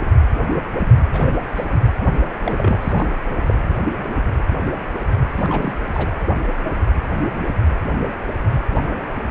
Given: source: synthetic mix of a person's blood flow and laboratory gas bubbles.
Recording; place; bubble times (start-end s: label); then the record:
Doppler ultrasound of blood flow; precordium
1.10-1.35 s: bubbles
1.54-1.80 s: bubbles
2.42-2.93 s: bubbles
2.97-3.05 s: bubbles
3.27-3.54 s: bubbles
5.37-5.79 s: bubbles
5.92-6.16 s: bubbles
From the record:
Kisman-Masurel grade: 221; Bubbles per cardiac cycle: several, 3 to 8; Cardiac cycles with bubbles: 10 to 50%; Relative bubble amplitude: barely perceptible (0.100 to 0.250); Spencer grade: 2 (many but less than half of the cardiac periods contain bubble signals, singularly or in groups); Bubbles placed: anywhere in the cardiac cycle